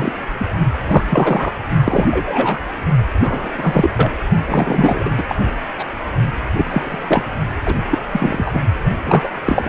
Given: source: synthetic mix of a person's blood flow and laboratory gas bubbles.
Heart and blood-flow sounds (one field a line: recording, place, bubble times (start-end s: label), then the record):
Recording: Doppler ultrasound of blood flow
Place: precordium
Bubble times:
0.00-0.12 s: bubbles
0.39-0.46 s: bubbles
0.86-1.04 s: bubbles
1.08-1.52 s: bubbles
1.85-2.06 s: bubbles
2.10-2.58 s: bubbles
3.22-3.51 s: bubbles
3.58-3.90 s: bubbles
3.96-4.11 s: bubbles
4.46-5.11 s: bubbles
5.16-5.23 s: bubbles
5.28-5.36 s: bubbles
5.79-5.84 s: bubbles
6.56-7.23 s: bubbles
7.65-7.74 s: bubbles
7.90-7.98 s: bubbles
8.12-8.59 s: bubbles
9.05-9.29 s: bubbles
9.43-9.69 s: bubbles
From the record:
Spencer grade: 3 (all of the cardiac periods contain showers or single bubble signals, but not dominating or overriding the cardiac motion signals)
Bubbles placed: only in the low amplitude regions of the cardiac cycle